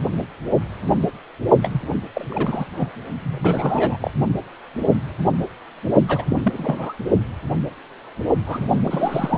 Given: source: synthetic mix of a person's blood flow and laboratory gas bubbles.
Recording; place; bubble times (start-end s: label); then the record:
Doppler ultrasound of blood flow; precordium
1.62-1.82 s: bubbles
2.15-2.25 s: bubbles
2.30-2.65 s: bubbles
2.76-2.90 s: bubbles
3.23-4.10 s: bubbles
6.08-6.41 s: bubbles
6.44-6.93 s: bubbles
8.46-8.68 s: bubbles
8.71-9.38 s: bubbles
From the record:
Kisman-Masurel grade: 332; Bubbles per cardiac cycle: rolling drumbeat, 9 or more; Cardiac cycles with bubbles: 50 to 99%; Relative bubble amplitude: moderate (0.250 to 0.450); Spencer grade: 3 (all of the cardiac periods contain showers or single bubble signals, but not dominating or overriding the cardiac motion signals); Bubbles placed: only in the low amplitude regions of the cardiac cycle